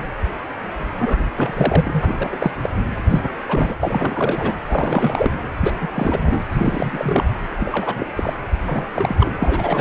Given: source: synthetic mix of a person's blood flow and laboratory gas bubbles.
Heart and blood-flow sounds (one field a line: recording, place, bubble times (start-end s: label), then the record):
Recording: Doppler ultrasound of blood flow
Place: precordium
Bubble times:
0.98-1.26 s: bubbles
1.36-2.15 s: bubbles
2.21-2.52 s: bubbles
2.61-2.69 s: bubbles
2.95-3.21 s: bubbles
3.23-3.29 s: bubbles
3.48-3.75 s: bubbles
3.82-4.54 s: bubbles
4.67-5.32 s: bubbles
5.60-5.73 s: bubbles
5.81-5.88 s: bubbles
5.94-6.42 s: bubbles
6.51-7.24 s: bubbles
7.58-8.06 s: bubbles
8.16-8.33 s: bubbles
8.65-9.31 s: bubbles
9.38-9.81 s: bubbles
From the record:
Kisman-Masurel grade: 342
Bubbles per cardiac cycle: rolling drumbeat, 9 or more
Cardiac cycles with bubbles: 100%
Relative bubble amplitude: moderate (0.250 to 0.450)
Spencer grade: 3 (all of the cardiac periods contain showers or single bubble signals, but not dominating or overriding the cardiac motion signals)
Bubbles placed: anywhere in the cardiac cycle